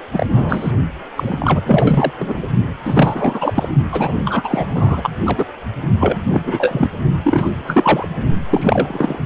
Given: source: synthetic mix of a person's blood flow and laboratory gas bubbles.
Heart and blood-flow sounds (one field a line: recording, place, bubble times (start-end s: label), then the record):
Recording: Doppler ultrasound of blood flow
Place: precordium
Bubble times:
0.13-0.26 s: bubbles
0.30-0.72 s: bubbles
1.16-2.12 s: bubbles
2.19-2.47 s: bubbles
2.85-3.69 s: bubbles
3.91-4.67 s: bubbles
4.75-5.17 s: bubbles
5.25-5.45 s: bubbles
5.99-6.22 s: bubbles
6.30-6.42 s: bubbles
6.46-6.88 s: bubbles
7.24-7.50 s: bubbles
7.67-8.06 s: bubbles
8.51-9.26 s: bubbles
From the record:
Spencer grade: 3 (all of the cardiac periods contain showers or single bubble signals, but not dominating or overriding the cardiac motion signals)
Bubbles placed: only in the low amplitude regions of the cardiac cycle